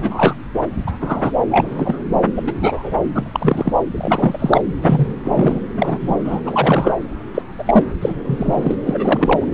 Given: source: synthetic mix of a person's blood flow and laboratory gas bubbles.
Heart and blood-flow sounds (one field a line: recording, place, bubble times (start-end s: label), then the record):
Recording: Doppler ultrasound of blood flow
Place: subclavian vein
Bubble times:
0.00-0.35 s: bubbles
0.86-0.92 s: bubbles
1.01-1.32 s: bubbles
1.50-1.67 s: bubbles
1.70-2.04 s: bubbles
2.35-2.43 s: bubbles
2.46-2.53 s: bubbles
2.61-2.91 s: bubbles
3.13-3.71 s: bubbles
3.91-4.62 s: bubbles
4.75-5.13 s: bubbles
5.24-5.59 s: bubbles
5.77-6.16 s: bubbles
6.25-6.40 s: bubbles
6.45-6.97 s: bubbles
7.34-7.42 s: bubbles
7.58-7.83 s: bubbles
8.01-8.76 s: bubbles
8.85-9.45 s: bubbles
From the record:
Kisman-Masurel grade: 243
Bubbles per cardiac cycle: several, 3 to 8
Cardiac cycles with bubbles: 100%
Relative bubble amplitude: loud (0.450 to 0.775)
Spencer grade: 3 (all of the cardiac periods contain showers or single bubble signals, but not dominating or overriding the cardiac motion signals)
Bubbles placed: anywhere in the cardiac cycle